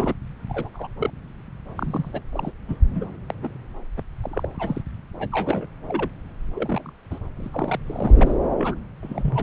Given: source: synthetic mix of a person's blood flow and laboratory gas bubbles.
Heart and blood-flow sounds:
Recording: Doppler ultrasound of blood flow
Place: subclavian vein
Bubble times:
0.00-0.14 s: bubbles
0.49-0.69 s: bubbles
0.73-0.88 s: bubbles
0.99-1.10 s: bubbles
1.76-2.21 s: bubbles
2.32-2.52 s: bubbles
2.68-2.81 s: bubbles
2.94-3.04 s: bubbles
3.30-3.34 s: bubbles
3.42-3.49 s: bubbles
3.97-4.02 s: bubbles
4.22-4.48 s: bubbles
4.52-4.81 s: bubbles
5.18-5.67 s: bubbles
5.88-6.09 s: bubbles
6.54-6.92 s: bubbles
7.10-7.18 s: bubbles
7.36-7.79 s: bubbles
7.86-8.36 s: bubbles
8.58-8.74 s: bubbles
9.02-9.43 s: bubbles
From the record:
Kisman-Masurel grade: 242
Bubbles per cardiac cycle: several, 3 to 8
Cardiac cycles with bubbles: 100%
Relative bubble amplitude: moderate (0.250 to 0.450)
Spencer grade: 3 (all of the cardiac periods contain showers or single bubble signals, but not dominating or overriding the cardiac motion signals)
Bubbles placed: anywhere in the cardiac cycle

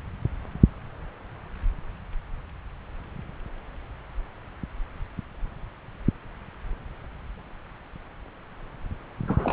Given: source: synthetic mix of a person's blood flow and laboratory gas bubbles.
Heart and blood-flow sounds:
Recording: Doppler ultrasound of blood flow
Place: subclavian vein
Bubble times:
9.27-9.53 s: bubbles
From the record:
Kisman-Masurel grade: 212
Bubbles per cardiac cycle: several, 3 to 8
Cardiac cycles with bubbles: 1 to 10%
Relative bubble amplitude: moderate (0.250 to 0.450)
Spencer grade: 1 (occasional bubble signal discernible with the cardiac motion signal, with majority of cardiac periods free of bubbles)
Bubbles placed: anywhere in the cardiac cycle

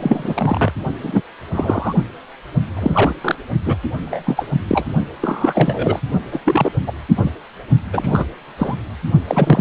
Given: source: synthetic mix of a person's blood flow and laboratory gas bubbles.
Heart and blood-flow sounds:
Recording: Doppler ultrasound of blood flow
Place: precordium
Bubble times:
0.00-0.72 s: bubbles
1.02-1.22 s: bubbles
1.51-1.93 s: bubbles
2.76-3.14 s: bubbles
3.21-3.36 s: bubbles
3.65-3.77 s: bubbles
4.01-4.47 s: bubbles
4.67-4.87 s: bubbles
5.21-6.00 s: bubbles
6.32-6.40 s: bubbles
6.45-6.71 s: bubbles
6.87-6.92 s: bubbles
7.16-7.31 s: bubbles
7.93-8.24 s: bubbles
8.58-8.75 s: bubbles
9.27-9.61 s: bubbles
From the record:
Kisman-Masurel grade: 233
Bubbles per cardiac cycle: several, 3 to 8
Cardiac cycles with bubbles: 50 to 99%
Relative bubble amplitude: loud (0.450 to 0.775)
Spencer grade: 3 (all of the cardiac periods contain showers or single bubble signals, but not dominating or overriding the cardiac motion signals)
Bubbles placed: only in the low amplitude regions of the cardiac cycle

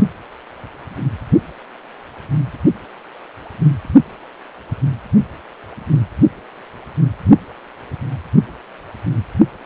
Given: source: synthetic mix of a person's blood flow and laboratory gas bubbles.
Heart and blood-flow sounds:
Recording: Doppler ultrasound of blood flow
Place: precordium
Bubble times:
no bubbles
From the record:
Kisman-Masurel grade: 000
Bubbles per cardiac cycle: 0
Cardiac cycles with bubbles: 0%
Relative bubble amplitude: no bubbles discernible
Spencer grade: 0 (complete lack of bubble signals)

